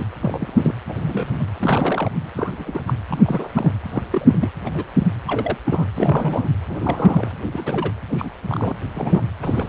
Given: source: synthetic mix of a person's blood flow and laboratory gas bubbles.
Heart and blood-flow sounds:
Doppler ultrasound of blood flow; precordium
0.00-0.05 s: bubbles
0.21-0.74 s: bubbles
0.88-0.93 s: bubbles
0.98-1.45 s: bubbles
1.54-2.11 s: bubbles
2.36-2.82 s: bubbles
2.86-2.94 s: bubbles
3.08-3.50 s: bubbles
3.53-3.73 s: bubbles
3.90-4.03 s: bubbles
4.12-4.50 s: bubbles
4.66-4.91 s: bubbles
4.98-5.06 s: bubbles
5.27-5.58 s: bubbles
5.65-5.88 s: bubbles
5.95-6.49 s: bubbles
6.68-7.31 s: bubbles
7.43-7.48 s: bubbles
7.52-7.92 s: bubbles
8.09-8.30 s: bubbles
8.48-8.76 s: bubbles
8.94-9.24 s: bubbles
9.42-9.69 s: bubbles
From the record:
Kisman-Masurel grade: 242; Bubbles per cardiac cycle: several, 3 to 8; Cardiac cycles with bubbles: 100%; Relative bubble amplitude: moderate (0.250 to 0.450); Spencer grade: 3 (all of the cardiac periods contain showers or single bubble signals, but not dominating or overriding the cardiac motion signals); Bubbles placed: anywhere in the cardiac cycle

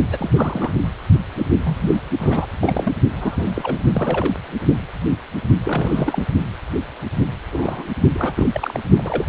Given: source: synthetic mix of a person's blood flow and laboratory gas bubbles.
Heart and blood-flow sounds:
Doppler ultrasound of blood flow; precordium
0.11-0.31 s: bubbles
0.33-0.74 s: bubbles
1.36-1.46 s: bubbles
1.64-1.98 s: bubbles
2.20-2.47 s: bubbles
2.61-2.93 s: bubbles
3.11-3.83 s: bubbles
3.93-4.34 s: bubbles
5.64-6.25 s: bubbles
7.52-7.92 s: bubbles
8.15-8.32 s: bubbles
8.37-8.47 s: bubbles
8.52-8.80 s: bubbles
8.97-9.29 s: bubbles
From the record:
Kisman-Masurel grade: 232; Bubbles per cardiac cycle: several, 3 to 8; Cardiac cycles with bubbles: 50 to 99%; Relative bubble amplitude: moderate (0.250 to 0.450); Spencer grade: 3 (all of the cardiac periods contain showers or single bubble signals, but not dominating or overriding the cardiac motion signals); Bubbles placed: only in the low amplitude regions of the cardiac cycle

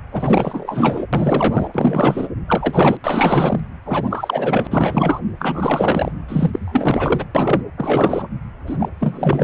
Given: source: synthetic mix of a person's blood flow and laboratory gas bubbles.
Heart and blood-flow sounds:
Doppler ultrasound of blood flow; precordium
0.12-1.06 s: bubbles
1.12-1.69 s: bubbles
1.74-2.27 s: bubbles
2.48-2.98 s: bubbles
3.03-3.60 s: bubbles
3.85-4.67 s: bubbles
4.71-5.21 s: bubbles
5.38-6.11 s: bubbles
6.28-7.24 s: bubbles
7.34-7.62 s: bubbles
7.77-8.28 s: bubbles
8.66-8.88 s: bubbles
8.99-9.44 s: bubbles
From the record:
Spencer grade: 4 (maximum detectable bubble signal sounding continuously throughout systole and diastole of every cardiac period, and overriding the amplitude of the normal cardiac signals); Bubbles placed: anywhere in the cardiac cycle

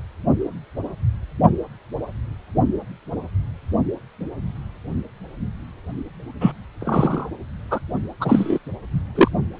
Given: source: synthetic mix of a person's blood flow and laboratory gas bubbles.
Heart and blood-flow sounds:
Doppler ultrasound of blood flow; precordium
6.40-6.52 s: bubbles
6.80-7.29 s: bubbles
7.71-7.79 s: bubbles
8.20-8.58 s: bubbles
9.15-9.29 s: bubbles
From the record:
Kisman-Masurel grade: 223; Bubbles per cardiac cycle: several, 3 to 8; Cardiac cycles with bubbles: 10 to 50%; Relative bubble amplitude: loud (0.450 to 0.775); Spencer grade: 2 (many but less than half of the cardiac periods contain bubble signals, singularly or in groups); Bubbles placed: only in the low amplitude regions of the cardiac cycle

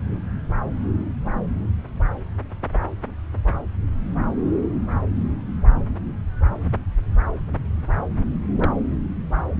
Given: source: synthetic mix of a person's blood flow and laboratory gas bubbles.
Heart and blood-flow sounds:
Doppler ultrasound of blood flow; subclavian vein
8.56-8.71 s: bubbles
From the record:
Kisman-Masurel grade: 111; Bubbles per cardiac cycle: 1 to 2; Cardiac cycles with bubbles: 1 to 10%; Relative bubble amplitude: barely perceptible (0.100 to 0.250); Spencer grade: 1 (occasional bubble signal discernible with the cardiac motion signal, with majority of cardiac periods free of bubbles); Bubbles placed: anywhere in the cardiac cycle

